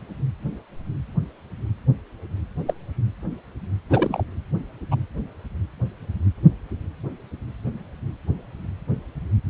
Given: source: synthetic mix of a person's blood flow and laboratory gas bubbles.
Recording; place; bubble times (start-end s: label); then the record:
Doppler ultrasound of blood flow; precordium
2.67-2.73 s: bubbles
3.90-4.24 s: bubbles
4.91-4.96 s: bubbles
From the record:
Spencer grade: 2 (many but less than half of the cardiac periods contain bubble signals, singularly or in groups); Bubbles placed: anywhere in the cardiac cycle